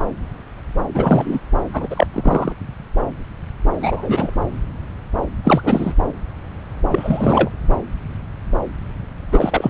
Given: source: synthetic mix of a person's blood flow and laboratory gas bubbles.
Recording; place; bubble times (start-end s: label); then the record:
Doppler ultrasound of blood flow; subclavian vein
0.94-1.40 s: bubbles
1.73-2.07 s: bubbles
2.12-2.52 s: bubbles
3.81-4.31 s: bubbles
5.44-5.94 s: bubbles
6.92-7.50 s: bubbles
9.31-9.70 s: bubbles
From the record:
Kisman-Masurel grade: 223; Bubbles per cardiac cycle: several, 3 to 8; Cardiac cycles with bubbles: 10 to 50%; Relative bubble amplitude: loud (0.450 to 0.775); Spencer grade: 2 (many but less than half of the cardiac periods contain bubble signals, singularly or in groups); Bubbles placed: anywhere in the cardiac cycle